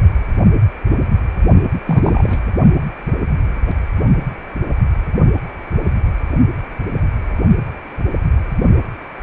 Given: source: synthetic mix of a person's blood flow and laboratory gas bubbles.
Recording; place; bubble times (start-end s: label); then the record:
Doppler ultrasound of blood flow; precordium
1.85-2.40 s: bubbles
From the record:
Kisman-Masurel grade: 212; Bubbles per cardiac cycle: several, 3 to 8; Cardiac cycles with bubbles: 1 to 10%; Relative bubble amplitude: moderate (0.250 to 0.450); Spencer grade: 1 (occasional bubble signal discernible with the cardiac motion signal, with majority of cardiac periods free of bubbles); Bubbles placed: only in the low amplitude regions of the cardiac cycle